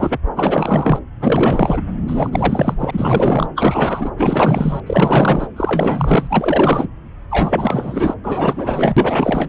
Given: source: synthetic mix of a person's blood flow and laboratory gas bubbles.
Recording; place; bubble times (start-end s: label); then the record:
Doppler ultrasound of blood flow; subclavian vein
0.00-0.18 s: bubbles
0.36-0.99 s: bubbles
1.20-1.81 s: bubbles
2.07-2.75 s: bubbles
2.79-3.48 s: bubbles
3.56-4.10 s: bubbles
4.16-4.80 s: bubbles
4.86-5.47 s: bubbles
5.56-6.89 s: bubbles
7.30-8.14 s: bubbles
8.24-9.49 s: bubbles
From the record:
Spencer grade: 4 (maximum detectable bubble signal sounding continuously throughout systole and diastole of every cardiac period, and overriding the amplitude of the normal cardiac signals); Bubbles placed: anywhere in the cardiac cycle